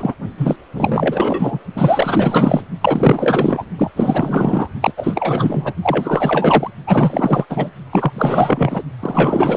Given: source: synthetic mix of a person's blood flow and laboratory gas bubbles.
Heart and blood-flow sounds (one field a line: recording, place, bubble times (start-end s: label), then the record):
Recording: Doppler ultrasound of blood flow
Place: precordium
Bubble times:
0.00-0.14 s: bubbles
0.38-0.56 s: bubbles
0.75-1.58 s: bubbles
1.75-2.63 s: bubbles
2.81-3.64 s: bubbles
3.78-3.91 s: bubbles
3.96-4.69 s: bubbles
4.81-4.93 s: bubbles
4.97-5.74 s: bubbles
5.82-6.71 s: bubbles
6.87-7.45 s: bubbles
7.49-7.70 s: bubbles
7.92-8.82 s: bubbles
9.00-9.57 s: bubbles
From the record:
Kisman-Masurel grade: 444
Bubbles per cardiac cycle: continuous sound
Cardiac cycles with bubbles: 100%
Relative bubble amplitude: maximal (0.775 to 0.999)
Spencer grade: 4 (maximum detectable bubble signal sounding continuously throughout systole and diastole of every cardiac period, and overriding the amplitude of the normal cardiac signals)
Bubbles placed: only in the low amplitude regions of the cardiac cycle